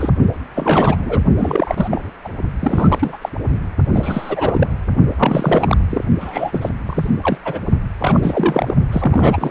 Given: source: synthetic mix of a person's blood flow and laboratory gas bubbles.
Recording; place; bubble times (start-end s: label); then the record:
Doppler ultrasound of blood flow; precordium
0.00-0.10 s: bubbles
0.55-1.22 s: bubbles
1.37-2.10 s: bubbles
2.24-2.29 s: bubbles
2.60-3.17 s: bubbles
3.21-3.29 s: bubbles
3.94-4.67 s: bubbles
5.17-5.77 s: bubbles
5.89-6.04 s: bubbles
6.19-6.69 s: bubbles
6.86-7.08 s: bubbles
7.21-7.38 s: bubbles
7.44-7.60 s: bubbles
8.00-8.75 s: bubbles
8.92-9.51 s: bubbles
From the record:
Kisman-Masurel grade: 343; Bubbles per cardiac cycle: rolling drumbeat, 9 or more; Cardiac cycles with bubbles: 100%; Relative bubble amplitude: loud (0.450 to 0.775); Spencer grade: 3 (all of the cardiac periods contain showers or single bubble signals, but not dominating or overriding the cardiac motion signals); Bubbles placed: only in the low amplitude regions of the cardiac cycle